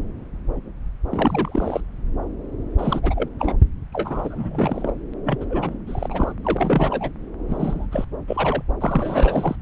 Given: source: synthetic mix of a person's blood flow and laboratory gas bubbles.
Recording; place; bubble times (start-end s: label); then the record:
Doppler ultrasound of blood flow; subclavian vein
1.11-1.81 s: bubbles
2.79-3.29 s: bubbles
3.39-3.54 s: bubbles
3.92-4.93 s: bubbles
5.25-5.45 s: bubbles
5.50-5.75 s: bubbles
5.87-6.33 s: bubbles
6.43-7.12 s: bubbles
7.49-7.86 s: bubbles
7.92-8.04 s: bubbles
8.27-8.62 s: bubbles
8.80-9.56 s: bubbles
From the record:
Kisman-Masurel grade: 332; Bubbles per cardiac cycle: rolling drumbeat, 9 or more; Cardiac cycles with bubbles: 50 to 99%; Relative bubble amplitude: moderate (0.250 to 0.450); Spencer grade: 3 (all of the cardiac periods contain showers or single bubble signals, but not dominating or overriding the cardiac motion signals); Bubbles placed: anywhere in the cardiac cycle